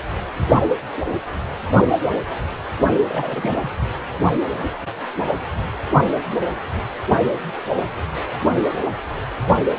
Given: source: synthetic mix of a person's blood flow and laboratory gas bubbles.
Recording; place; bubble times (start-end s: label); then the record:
Doppler ultrasound of blood flow; precordium
3.09-3.70 s: bubbles
From the record:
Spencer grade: 1 (occasional bubble signal discernible with the cardiac motion signal, with majority of cardiac periods free of bubbles); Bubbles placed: anywhere in the cardiac cycle